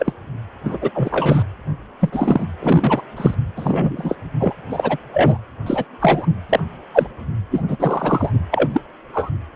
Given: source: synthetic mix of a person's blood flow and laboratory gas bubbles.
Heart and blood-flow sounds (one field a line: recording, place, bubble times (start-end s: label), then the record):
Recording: Doppler ultrasound of blood flow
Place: precordium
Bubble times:
0.00-0.13 s: bubbles
0.65-0.79 s: bubbles
0.81-0.90 s: bubbles
0.94-1.43 s: bubbles
2.00-2.46 s: bubbles
2.60-3.02 s: bubbles
3.17-3.35 s: bubbles
3.56-4.16 s: bubbles
4.39-4.54 s: bubbles
4.70-4.98 s: bubbles
5.14-5.38 s: bubbles
5.66-5.85 s: bubbles
6.01-6.27 s: bubbles
6.49-6.60 s: bubbles
6.93-7.07 s: bubbles
7.51-7.62 s: bubbles
7.68-7.76 s: bubbles
7.79-8.30 s: bubbles
8.51-8.68 s: bubbles
8.73-8.80 s: bubbles
9.13-9.30 s: bubbles
From the record:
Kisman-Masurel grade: 243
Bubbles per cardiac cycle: several, 3 to 8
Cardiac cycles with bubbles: 100%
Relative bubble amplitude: loud (0.450 to 0.775)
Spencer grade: 3 (all of the cardiac periods contain showers or single bubble signals, but not dominating or overriding the cardiac motion signals)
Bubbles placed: anywhere in the cardiac cycle